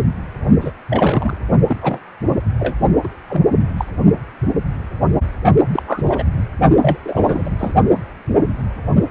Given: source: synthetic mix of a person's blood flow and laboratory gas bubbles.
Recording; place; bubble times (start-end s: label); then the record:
Doppler ultrasound of blood flow; precordium
0.61-0.71 s: bubbles
0.90-1.37 s: bubbles
1.68-1.76 s: bubbles
1.81-1.99 s: bubbles
2.28-2.35 s: bubbles
2.59-2.75 s: bubbles
3.04-3.08 s: bubbles
3.29-3.42 s: bubbles
3.77-3.85 s: bubbles
5.71-5.83 s: bubbles
5.87-6.02 s: bubbles
6.05-6.24 s: bubbles
6.82-6.97 s: bubbles
7.04-7.50 s: bubbles
7.58-7.75 s: bubbles
From the record:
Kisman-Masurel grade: 232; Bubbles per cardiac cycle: several, 3 to 8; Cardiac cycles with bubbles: 50 to 99%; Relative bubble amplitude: moderate (0.250 to 0.450); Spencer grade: 3 (all of the cardiac periods contain showers or single bubble signals, but not dominating or overriding the cardiac motion signals); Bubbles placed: only in the low amplitude regions of the cardiac cycle